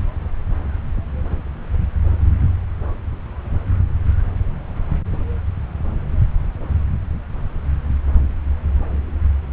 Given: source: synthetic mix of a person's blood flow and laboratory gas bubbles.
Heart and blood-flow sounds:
Doppler ultrasound of blood flow; subclavian vein
no bubbles
From the record:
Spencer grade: 0 (complete lack of bubble signals)

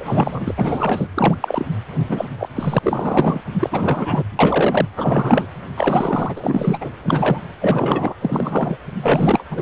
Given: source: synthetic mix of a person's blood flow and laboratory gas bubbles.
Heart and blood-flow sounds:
Doppler ultrasound of blood flow; precordium
0.00-1.08 s: bubbles
1.14-1.36 s: bubbles
1.40-1.67 s: bubbles
2.08-2.26 s: bubbles
2.39-2.49 s: bubbles
2.56-2.79 s: bubbles
2.83-3.41 s: bubbles
3.59-4.24 s: bubbles
4.39-4.85 s: bubbles
4.96-5.46 s: bubbles
5.76-6.78 s: bubbles
6.80-6.89 s: bubbles
7.02-7.40 s: bubbles
7.60-8.15 s: bubbles
8.21-8.77 s: bubbles
9.02-9.44 s: bubbles
9.51-9.62 s: bubbles
From the record:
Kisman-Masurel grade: 343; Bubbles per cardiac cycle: rolling drumbeat, 9 or more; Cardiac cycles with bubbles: 100%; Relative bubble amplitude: loud (0.450 to 0.775); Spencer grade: 3 (all of the cardiac periods contain showers or single bubble signals, but not dominating or overriding the cardiac motion signals); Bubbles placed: anywhere in the cardiac cycle

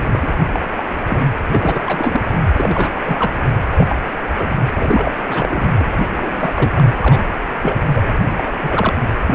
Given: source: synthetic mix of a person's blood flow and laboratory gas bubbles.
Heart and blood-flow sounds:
Doppler ultrasound of blood flow; precordium
0.00-0.19 s: bubbles
0.22-0.28 s: bubbles
0.54-0.60 s: bubbles
0.76-0.83 s: bubbles
1.09-1.17 s: bubbles
1.52-1.82 s: bubbles
1.87-2.21 s: bubbles
2.56-2.92 s: bubbles
3.04-3.33 s: bubbles
3.76-3.96 s: bubbles
4.38-4.50 s: bubbles
4.76-5.14 s: bubbles
5.28-5.69 s: bubbles
5.79-5.88 s: bubbles
6.17-6.86 s: bubbles
7.02-7.20 s: bubbles
7.62-7.76 s: bubbles
7.95-8.02 s: bubbles
8.37-8.51 s: bubbles
8.62-8.94 s: bubbles
9.26-9.35 s: bubbles
From the record:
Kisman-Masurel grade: 242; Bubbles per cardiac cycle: several, 3 to 8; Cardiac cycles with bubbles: 100%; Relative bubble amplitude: moderate (0.250 to 0.450); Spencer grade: 3 (all of the cardiac periods contain showers or single bubble signals, but not dominating or overriding the cardiac motion signals); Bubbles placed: anywhere in the cardiac cycle

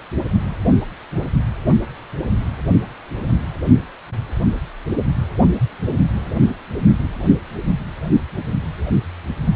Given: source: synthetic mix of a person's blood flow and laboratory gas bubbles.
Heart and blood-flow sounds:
Doppler ultrasound of blood flow; precordium
no bubbles
From the record:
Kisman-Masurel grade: 000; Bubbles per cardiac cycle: 0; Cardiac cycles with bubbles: 0%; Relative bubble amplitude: no bubbles discernible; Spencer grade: 0 (complete lack of bubble signals)

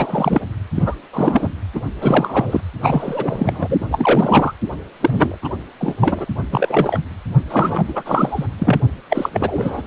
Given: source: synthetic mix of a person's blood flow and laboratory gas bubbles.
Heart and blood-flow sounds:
Doppler ultrasound of blood flow; precordium
0.00-0.40 s: bubbles
0.72-0.94 s: bubbles
1.13-1.48 s: bubbles
1.74-1.80 s: bubbles
2.01-2.60 s: bubbles
2.82-3.77 s: bubbles
3.82-3.85 s: bubbles
3.90-4.54 s: bubbles
5.00-5.38 s: bubbles
5.42-5.50 s: bubbles
5.80-5.95 s: bubbles
6.00-6.25 s: bubbles
6.52-7.00 s: bubbles
7.50-7.83 s: bubbles
7.88-8.02 s: bubbles
8.05-8.46 s: bubbles
8.58-8.80 s: bubbles
9.09-9.29 s: bubbles
9.33-9.82 s: bubbles
From the record:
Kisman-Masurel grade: 343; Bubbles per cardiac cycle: rolling drumbeat, 9 or more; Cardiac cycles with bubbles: 100%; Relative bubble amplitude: loud (0.450 to 0.775); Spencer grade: 3 (all of the cardiac periods contain showers or single bubble signals, but not dominating or overriding the cardiac motion signals); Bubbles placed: anywhere in the cardiac cycle

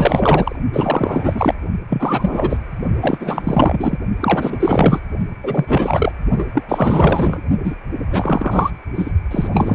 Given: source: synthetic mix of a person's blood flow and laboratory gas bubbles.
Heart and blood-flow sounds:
Doppler ultrasound of blood flow; precordium
0.00-0.55 s: bubbles
0.73-1.54 s: bubbles
1.90-2.58 s: bubbles
3.01-3.98 s: bubbles
4.19-5.00 s: bubbles
5.43-6.12 s: bubbles
6.38-6.44 s: bubbles
6.54-6.63 s: bubbles
6.68-7.43 s: bubbles
7.64-7.75 s: bubbles
8.11-8.71 s: bubbles
8.95-9.12 s: bubbles
9.30-9.49 s: bubbles
9.52-9.75 s: bubbles
From the record:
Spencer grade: 4 (maximum detectable bubble signal sounding continuously throughout systole and diastole of every cardiac period, and overriding the amplitude of the normal cardiac signals); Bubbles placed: only in the low amplitude regions of the cardiac cycle

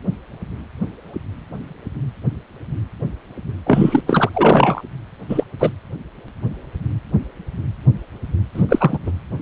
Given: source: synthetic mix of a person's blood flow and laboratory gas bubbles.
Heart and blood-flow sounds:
Doppler ultrasound of blood flow; precordium
3.66-4.01 s: bubbles
4.07-4.29 s: bubbles
4.33-4.82 s: bubbles
5.29-5.43 s: bubbles
5.59-5.71 s: bubbles
8.54-8.63 s: bubbles
8.69-8.98 s: bubbles
9.06-9.11 s: bubbles
From the record:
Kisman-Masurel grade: 223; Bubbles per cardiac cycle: several, 3 to 8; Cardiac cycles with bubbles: 10 to 50%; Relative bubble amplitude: loud (0.450 to 0.775); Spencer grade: 2 (many but less than half of the cardiac periods contain bubble signals, singularly or in groups); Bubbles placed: anywhere in the cardiac cycle

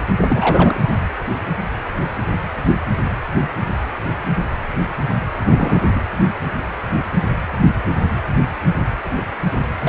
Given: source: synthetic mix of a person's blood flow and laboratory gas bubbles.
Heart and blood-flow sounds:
Doppler ultrasound of blood flow; precordium
0.22-0.80 s: bubbles
5.43-5.91 s: bubbles
5.95-6.00 s: bubbles
9.81-9.89 s: bubbles
From the record:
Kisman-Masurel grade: 222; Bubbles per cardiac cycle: several, 3 to 8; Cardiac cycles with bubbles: 10 to 50%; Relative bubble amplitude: moderate (0.250 to 0.450); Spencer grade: 2 (many but less than half of the cardiac periods contain bubble signals, singularly or in groups); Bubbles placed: anywhere in the cardiac cycle

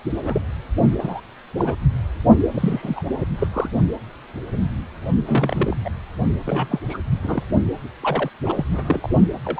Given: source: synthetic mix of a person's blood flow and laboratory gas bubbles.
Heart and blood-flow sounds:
Doppler ultrasound of blood flow; precordium
0.25-0.41 s: bubbles
0.98-1.20 s: bubbles
1.57-1.75 s: bubbles
2.54-3.04 s: bubbles
3.21-3.26 s: bubbles
3.38-3.48 s: bubbles
3.53-3.69 s: bubbles
5.26-5.77 s: bubbles
5.84-5.90 s: bubbles
6.46-6.79 s: bubbles
6.89-6.98 s: bubbles
7.23-7.43 s: bubbles
8.03-8.29 s: bubbles
8.44-8.64 s: bubbles
8.72-9.09 s: bubbles
9.45-9.60 s: bubbles
From the record:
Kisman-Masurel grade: 232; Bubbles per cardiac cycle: several, 3 to 8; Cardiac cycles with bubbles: 50 to 99%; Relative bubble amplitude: moderate (0.250 to 0.450); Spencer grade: 3 (all of the cardiac periods contain showers or single bubble signals, but not dominating or overriding the cardiac motion signals); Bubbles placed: only in the low amplitude regions of the cardiac cycle

